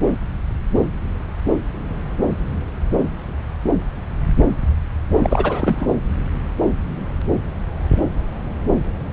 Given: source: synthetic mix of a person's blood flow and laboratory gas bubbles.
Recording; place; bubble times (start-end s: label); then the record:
Doppler ultrasound of blood flow; subclavian vein
5.23-5.88 s: bubbles
From the record:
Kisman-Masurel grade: 223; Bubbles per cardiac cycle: several, 3 to 8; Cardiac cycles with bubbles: 10 to 50%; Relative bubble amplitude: loud (0.450 to 0.775); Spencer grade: 2 (many but less than half of the cardiac periods contain bubble signals, singularly or in groups); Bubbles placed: anywhere in the cardiac cycle